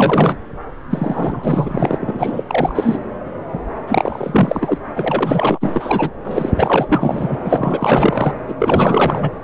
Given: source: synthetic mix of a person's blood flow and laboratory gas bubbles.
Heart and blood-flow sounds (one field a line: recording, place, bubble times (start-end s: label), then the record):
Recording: Doppler ultrasound of blood flow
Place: subclavian vein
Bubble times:
0.00-0.37 s: bubbles
0.90-1.97 s: bubbles
2.00-2.44 s: bubbles
2.47-2.99 s: bubbles
3.53-3.60 s: bubbles
3.87-4.79 s: bubbles
4.92-6.11 s: bubbles
6.24-6.53 s: bubbles
6.57-7.37 s: bubbles
7.45-8.34 s: bubbles
8.48-8.55 s: bubbles
8.59-9.30 s: bubbles
From the record:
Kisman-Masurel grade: 444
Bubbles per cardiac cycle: continuous sound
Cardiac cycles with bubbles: 100%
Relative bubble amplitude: maximal (0.775 to 0.999)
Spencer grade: 4 (maximum detectable bubble signal sounding continuously throughout systole and diastole of every cardiac period, and overriding the amplitude of the normal cardiac signals)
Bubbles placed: anywhere in the cardiac cycle